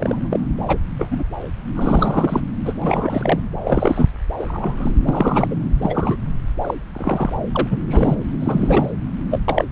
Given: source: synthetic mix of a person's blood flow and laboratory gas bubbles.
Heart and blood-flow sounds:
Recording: Doppler ultrasound of blood flow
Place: subclavian vein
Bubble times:
0.00-0.40 s: bubbles
0.68-0.78 s: bubbles
0.98-1.23 s: bubbles
1.75-2.40 s: bubbles
2.65-2.73 s: bubbles
2.81-3.40 s: bubbles
3.57-4.08 s: bubbles
4.38-4.92 s: bubbles
5.08-5.55 s: bubbles
5.81-6.17 s: bubbles
6.61-6.74 s: bubbles
6.93-7.33 s: bubbles
7.52-7.79 s: bubbles
7.88-8.16 s: bubbles
8.40-8.91 s: bubbles
9.31-9.39 s: bubbles
9.48-9.65 s: bubbles
From the record:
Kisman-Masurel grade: 242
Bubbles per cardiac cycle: several, 3 to 8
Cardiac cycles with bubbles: 100%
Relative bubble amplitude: moderate (0.250 to 0.450)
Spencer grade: 3 (all of the cardiac periods contain showers or single bubble signals, but not dominating or overriding the cardiac motion signals)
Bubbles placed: anywhere in the cardiac cycle

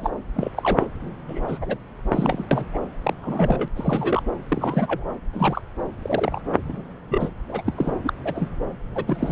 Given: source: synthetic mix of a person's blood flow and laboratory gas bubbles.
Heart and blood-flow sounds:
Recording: Doppler ultrasound of blood flow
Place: subclavian vein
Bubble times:
0.00-0.10 s: bubbles
0.34-0.52 s: bubbles
0.56-0.87 s: bubbles
1.27-1.77 s: bubbles
2.11-2.46 s: bubbles
2.51-2.65 s: bubbles
2.72-2.79 s: bubbles
3.03-3.13 s: bubbles
3.23-3.68 s: bubbles
3.75-4.23 s: bubbles
4.48-5.12 s: bubbles
5.33-5.62 s: bubbles
6.02-6.42 s: bubbles
6.64-6.82 s: bubbles
7.08-7.29 s: bubbles
7.49-7.62 s: bubbles
7.66-7.73 s: bubbles
7.77-7.96 s: bubbles
8.03-8.13 s: bubbles
8.23-8.60 s: bubbles
8.95-9.31 s: bubbles
From the record:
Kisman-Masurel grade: 242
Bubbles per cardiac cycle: several, 3 to 8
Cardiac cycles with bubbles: 100%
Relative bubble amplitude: moderate (0.250 to 0.450)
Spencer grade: 3 (all of the cardiac periods contain showers or single bubble signals, but not dominating or overriding the cardiac motion signals)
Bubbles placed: anywhere in the cardiac cycle

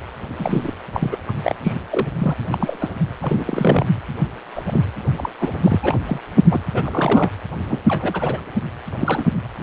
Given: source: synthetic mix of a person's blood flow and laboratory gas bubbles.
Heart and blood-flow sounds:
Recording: Doppler ultrasound of blood flow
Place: precordium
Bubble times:
0.38-0.73 s: bubbles
0.92-1.18 s: bubbles
1.28-1.33 s: bubbles
1.43-1.55 s: bubbles
1.64-1.73 s: bubbles
1.90-2.08 s: bubbles
2.19-2.34 s: bubbles
2.52-2.92 s: bubbles
3.21-3.87 s: bubbles
4.55-4.64 s: bubbles
4.67-4.85 s: bubbles
5.17-5.29 s: bubbles
5.40-5.80 s: bubbles
5.83-5.97 s: bubbles
6.06-6.19 s: bubbles
6.50-6.61 s: bubbles
6.74-7.31 s: bubbles
7.68-7.79 s: bubbles
7.88-8.41 s: bubbles
9.01-9.24 s: bubbles
From the record:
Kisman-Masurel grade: 242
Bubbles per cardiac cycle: several, 3 to 8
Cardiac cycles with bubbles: 100%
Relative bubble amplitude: moderate (0.250 to 0.450)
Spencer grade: 3 (all of the cardiac periods contain showers or single bubble signals, but not dominating or overriding the cardiac motion signals)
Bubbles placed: anywhere in the cardiac cycle

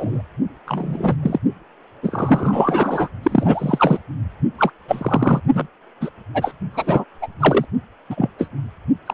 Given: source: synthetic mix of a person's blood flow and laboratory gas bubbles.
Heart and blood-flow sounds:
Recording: Doppler ultrasound of blood flow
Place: precordium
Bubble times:
0.00-0.22 s: bubbles
0.67-1.16 s: bubbles
1.23-1.39 s: bubbles
2.02-3.08 s: bubbles
3.23-3.99 s: bubbles
4.58-4.71 s: bubbles
4.88-5.41 s: bubbles
5.54-5.67 s: bubbles
6.01-6.10 s: bubbles
6.34-6.52 s: bubbles
6.73-7.04 s: bubbles
7.21-7.27 s: bubbles
7.39-7.65 s: bubbles
8.09-8.30 s: bubbles
8.38-8.48 s: bubbles
9.06-9.14 s: bubbles
From the record:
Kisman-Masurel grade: 243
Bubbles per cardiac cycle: several, 3 to 8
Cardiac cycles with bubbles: 100%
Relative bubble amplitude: loud (0.450 to 0.775)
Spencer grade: 3 (all of the cardiac periods contain showers or single bubble signals, but not dominating or overriding the cardiac motion signals)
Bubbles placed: only in the low amplitude regions of the cardiac cycle

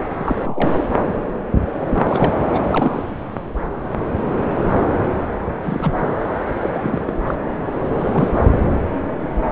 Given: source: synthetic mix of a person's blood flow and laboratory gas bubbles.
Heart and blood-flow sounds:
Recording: Doppler ultrasound of blood flow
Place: subclavian vein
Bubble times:
0.19-0.84 s: bubbles
1.90-2.45 s: bubbles
2.53-2.61 s: bubbles
2.64-3.03 s: bubbles
5.63-6.09 s: bubbles
6.61-7.14 s: bubbles
7.27-7.35 s: bubbles
7.97-8.29 s: bubbles
From the record:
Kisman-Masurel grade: 232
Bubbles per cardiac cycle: several, 3 to 8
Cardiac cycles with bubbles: 50 to 99%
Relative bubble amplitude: moderate (0.250 to 0.450)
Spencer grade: 3 (all of the cardiac periods contain showers or single bubble signals, but not dominating or overriding the cardiac motion signals)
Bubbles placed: anywhere in the cardiac cycle

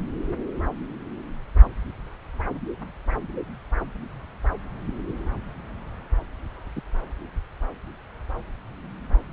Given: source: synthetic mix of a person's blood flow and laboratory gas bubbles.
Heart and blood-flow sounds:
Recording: Doppler ultrasound of blood flow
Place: subclavian vein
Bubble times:
6.75-6.81 s: bubbles
From the record:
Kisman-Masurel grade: 111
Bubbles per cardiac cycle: 1 to 2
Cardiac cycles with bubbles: 1 to 10%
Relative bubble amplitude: barely perceptible (0.100 to 0.250)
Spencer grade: 1 (occasional bubble signal discernible with the cardiac motion signal, with majority of cardiac periods free of bubbles)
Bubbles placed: anywhere in the cardiac cycle

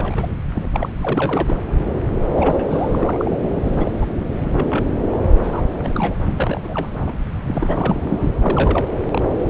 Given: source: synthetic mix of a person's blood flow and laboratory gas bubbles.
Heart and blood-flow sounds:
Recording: Doppler ultrasound of blood flow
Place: subclavian vein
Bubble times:
0.00-0.36 s: bubbles
0.55-0.71 s: bubbles
0.73-0.89 s: bubbles
1.01-1.62 s: bubbles
2.29-2.66 s: bubbles
2.69-3.35 s: bubbles
3.67-3.98 s: bubbles
4.01-4.05 s: bubbles
4.41-4.84 s: bubbles
5.11-5.20 s: bubbles
5.42-5.62 s: bubbles
5.79-6.14 s: bubbles
6.31-6.60 s: bubbles
6.63-6.97 s: bubbles
7.06-7.16 s: bubbles
7.46-8.02 s: bubbles
8.08-8.29 s: bubbles
8.40-8.85 s: bubbles
8.93-8.98 s: bubbles
9.09-9.25 s: bubbles
From the record:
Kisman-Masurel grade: 342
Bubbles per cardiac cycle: rolling drumbeat, 9 or more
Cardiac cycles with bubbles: 100%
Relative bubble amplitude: moderate (0.250 to 0.450)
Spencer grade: 3 (all of the cardiac periods contain showers or single bubble signals, but not dominating or overriding the cardiac motion signals)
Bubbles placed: anywhere in the cardiac cycle

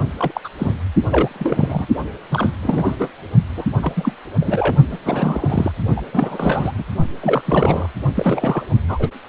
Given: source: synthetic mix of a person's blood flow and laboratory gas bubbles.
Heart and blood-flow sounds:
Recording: Doppler ultrasound of blood flow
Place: precordium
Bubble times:
0.18-0.41 s: bubbles
0.44-0.48 s: bubbles
0.58-0.74 s: bubbles
1.11-1.87 s: bubbles
2.31-2.50 s: bubbles
2.62-3.10 s: bubbles
3.57-3.65 s: bubbles
3.82-4.12 s: bubbles
4.41-4.74 s: bubbles
4.92-4.98 s: bubbles
5.03-5.72 s: bubbles
5.96-6.01 s: bubbles
6.12-6.72 s: bubbles
6.78-6.84 s: bubbles
7.21-7.41 s: bubbles
7.45-7.88 s: bubbles
8.15-8.62 s: bubbles
8.88-9.08 s: bubbles
From the record:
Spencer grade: 3 (all of the cardiac periods contain showers or single bubble signals, but not dominating or overriding the cardiac motion signals)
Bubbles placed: only in the low amplitude regions of the cardiac cycle

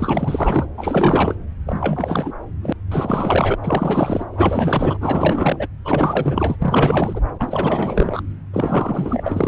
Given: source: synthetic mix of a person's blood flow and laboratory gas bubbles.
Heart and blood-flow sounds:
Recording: Doppler ultrasound of blood flow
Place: subclavian vein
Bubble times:
0.00-0.68 s: bubbles
0.77-1.35 s: bubbles
1.66-2.33 s: bubbles
2.62-2.73 s: bubbles
2.90-3.56 s: bubbles
3.62-4.24 s: bubbles
4.32-4.97 s: bubbles
5.00-5.68 s: bubbles
5.85-6.56 s: bubbles
6.62-7.21 s: bubbles
7.38-8.21 s: bubbles
8.53-9.48 s: bubbles
From the record:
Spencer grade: 4 (maximum detectable bubble signal sounding continuously throughout systole and diastole of every cardiac period, and overriding the amplitude of the normal cardiac signals)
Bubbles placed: anywhere in the cardiac cycle

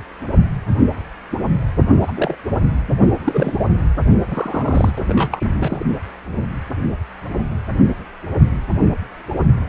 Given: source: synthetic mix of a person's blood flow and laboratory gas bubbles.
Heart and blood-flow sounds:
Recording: Doppler ultrasound of blood flow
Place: precordium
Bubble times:
2.01-2.35 s: bubbles
3.24-3.65 s: bubbles
4.20-4.92 s: bubbles
4.97-5.84 s: bubbles
From the record:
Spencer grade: 2 (many but less than half of the cardiac periods contain bubble signals, singularly or in groups)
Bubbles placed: anywhere in the cardiac cycle

